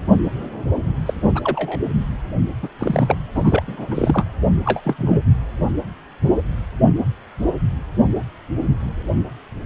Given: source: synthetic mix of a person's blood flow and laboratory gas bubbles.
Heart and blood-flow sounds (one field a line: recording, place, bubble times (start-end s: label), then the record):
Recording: Doppler ultrasound of blood flow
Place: precordium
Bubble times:
1.05-1.14 s: bubbles
1.34-1.41 s: bubbles
1.44-1.80 s: bubbles
2.62-2.69 s: bubbles
2.78-3.17 s: bubbles
3.34-3.62 s: bubbles
3.67-4.25 s: bubbles
4.65-4.81 s: bubbles
4.85-5.21 s: bubbles
From the record:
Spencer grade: 2 (many but less than half of the cardiac periods contain bubble signals, singularly or in groups)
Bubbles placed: anywhere in the cardiac cycle